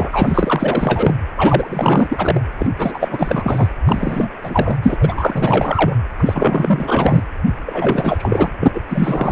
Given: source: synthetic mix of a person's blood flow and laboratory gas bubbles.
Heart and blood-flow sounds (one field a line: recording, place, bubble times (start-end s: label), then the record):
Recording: Doppler ultrasound of blood flow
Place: precordium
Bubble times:
0.00-1.16 s: bubbles
1.36-2.40 s: bubbles
2.58-2.70 s: bubbles
2.78-3.69 s: bubbles
3.85-4.33 s: bubbles
4.43-4.77 s: bubbles
4.82-4.96 s: bubbles
5.00-5.95 s: bubbles
6.19-7.23 s: bubbles
7.66-8.49 s: bubbles
8.60-8.81 s: bubbles
8.89-9.32 s: bubbles
From the record:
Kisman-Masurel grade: 444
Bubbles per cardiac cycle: continuous sound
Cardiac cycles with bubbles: 100%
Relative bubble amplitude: maximal (0.775 to 0.999)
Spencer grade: 4 (maximum detectable bubble signal sounding continuously throughout systole and diastole of every cardiac period, and overriding the amplitude of the normal cardiac signals)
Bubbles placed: anywhere in the cardiac cycle